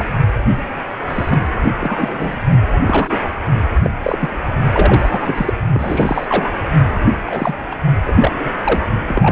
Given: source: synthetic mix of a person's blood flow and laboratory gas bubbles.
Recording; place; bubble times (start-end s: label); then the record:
Doppler ultrasound of blood flow; precordium
0.00-0.05 s: bubbles
0.53-0.62 s: bubbles
1.08-1.38 s: bubbles
1.80-2.36 s: bubbles
2.50-2.58 s: bubbles
2.87-3.17 s: bubbles
3.83-3.90 s: bubbles
4.02-4.29 s: bubbles
4.72-5.54 s: bubbles
5.73-6.50 s: bubbles
7.26-7.54 s: bubbles
7.71-7.75 s: bubbles
8.04-8.53 s: bubbles
8.64-8.83 s: bubbles
9.05-9.32 s: bubbles
From the record:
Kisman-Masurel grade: 233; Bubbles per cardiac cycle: several, 3 to 8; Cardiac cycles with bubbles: 50 to 99%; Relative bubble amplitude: loud (0.450 to 0.775); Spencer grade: 3 (all of the cardiac periods contain showers or single bubble signals, but not dominating or overriding the cardiac motion signals); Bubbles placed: anywhere in the cardiac cycle